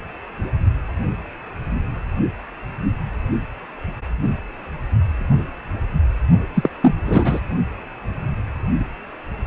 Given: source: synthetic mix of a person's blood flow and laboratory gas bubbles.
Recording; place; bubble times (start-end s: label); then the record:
Doppler ultrasound of blood flow; precordium
6.54-6.70 s: bubbles
6.82-6.95 s: bubbles
7.05-7.41 s: bubbles
From the record:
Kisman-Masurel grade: 223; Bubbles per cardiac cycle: several, 3 to 8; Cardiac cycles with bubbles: 10 to 50%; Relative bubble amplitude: loud (0.450 to 0.775); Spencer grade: 2 (many but less than half of the cardiac periods contain bubble signals, singularly or in groups); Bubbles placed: only in the low amplitude regions of the cardiac cycle